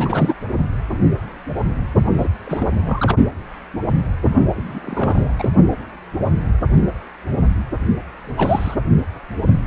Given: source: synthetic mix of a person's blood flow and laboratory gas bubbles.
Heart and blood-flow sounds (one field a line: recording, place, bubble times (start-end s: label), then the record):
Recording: Doppler ultrasound of blood flow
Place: precordium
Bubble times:
0.00-0.34 s: bubbles
2.13-2.28 s: bubbles
2.43-2.69 s: bubbles
2.84-3.17 s: bubbles
4.54-5.33 s: bubbles
5.37-5.49 s: bubbles
8.37-8.75 s: bubbles
From the record:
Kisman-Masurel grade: 232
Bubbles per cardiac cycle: several, 3 to 8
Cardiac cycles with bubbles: 50 to 99%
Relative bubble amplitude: moderate (0.250 to 0.450)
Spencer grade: 3 (all of the cardiac periods contain showers or single bubble signals, but not dominating or overriding the cardiac motion signals)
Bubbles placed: only in the low amplitude regions of the cardiac cycle